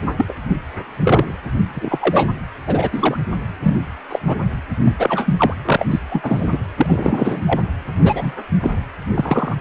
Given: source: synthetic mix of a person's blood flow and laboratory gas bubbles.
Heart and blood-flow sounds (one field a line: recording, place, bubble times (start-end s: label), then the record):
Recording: Doppler ultrasound of blood flow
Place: precordium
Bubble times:
0.18-0.25 s: bubbles
0.28-0.33 s: bubbles
1.03-1.32 s: bubbles
1.74-2.30 s: bubbles
2.67-2.89 s: bubbles
2.92-3.17 s: bubbles
3.63-3.76 s: bubbles
4.09-4.19 s: bubbles
4.26-4.36 s: bubbles
4.84-5.34 s: bubbles
5.37-5.54 s: bubbles
5.65-5.86 s: bubbles
5.91-6.00 s: bubbles
6.10-6.58 s: bubbles
6.76-7.42 s: bubbles
7.46-7.61 s: bubbles
8.02-8.34 s: bubbles
8.61-8.71 s: bubbles
9.14-9.56 s: bubbles
From the record:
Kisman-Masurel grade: 243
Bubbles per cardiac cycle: several, 3 to 8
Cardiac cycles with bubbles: 100%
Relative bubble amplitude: loud (0.450 to 0.775)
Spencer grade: 3 (all of the cardiac periods contain showers or single bubble signals, but not dominating or overriding the cardiac motion signals)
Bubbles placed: anywhere in the cardiac cycle